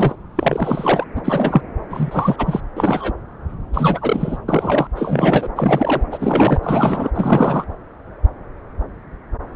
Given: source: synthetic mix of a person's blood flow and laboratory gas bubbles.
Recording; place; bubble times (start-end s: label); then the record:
Doppler ultrasound of blood flow; subclavian vein
0.00-0.15 s: bubbles
0.36-1.04 s: bubbles
1.15-1.61 s: bubbles
1.90-2.60 s: bubbles
2.76-3.12 s: bubbles
3.73-4.38 s: bubbles
4.48-4.87 s: bubbles
4.96-5.49 s: bubbles
5.56-6.03 s: bubbles
6.12-7.10 s: bubbles
7.15-7.64 s: bubbles
From the record:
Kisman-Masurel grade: 333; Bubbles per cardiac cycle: rolling drumbeat, 9 or more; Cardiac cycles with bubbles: 50 to 99%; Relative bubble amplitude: loud (0.450 to 0.775); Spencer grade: 3 (all of the cardiac periods contain showers or single bubble signals, but not dominating or overriding the cardiac motion signals); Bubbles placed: anywhere in the cardiac cycle